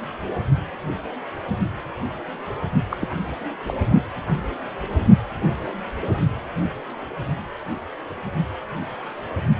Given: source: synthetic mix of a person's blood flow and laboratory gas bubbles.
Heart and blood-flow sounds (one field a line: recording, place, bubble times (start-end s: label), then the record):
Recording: Doppler ultrasound of blood flow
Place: precordium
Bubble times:
2.90-2.97 s: bubbles
3.01-3.08 s: bubbles
3.67-3.74 s: bubbles
From the record:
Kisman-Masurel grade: 212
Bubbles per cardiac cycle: several, 3 to 8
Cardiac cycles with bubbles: 1 to 10%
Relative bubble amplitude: moderate (0.250 to 0.450)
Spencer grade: 1 (occasional bubble signal discernible with the cardiac motion signal, with majority of cardiac periods free of bubbles)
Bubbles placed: only in the low amplitude regions of the cardiac cycle